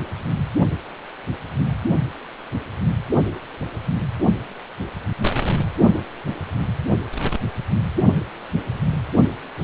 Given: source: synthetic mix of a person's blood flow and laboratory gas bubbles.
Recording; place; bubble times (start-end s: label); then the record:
Doppler ultrasound of blood flow; precordium
no bubbles
From the record:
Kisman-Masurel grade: 000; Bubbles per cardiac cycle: 0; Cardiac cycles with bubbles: 0%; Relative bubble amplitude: no bubbles discernible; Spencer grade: 0 (complete lack of bubble signals)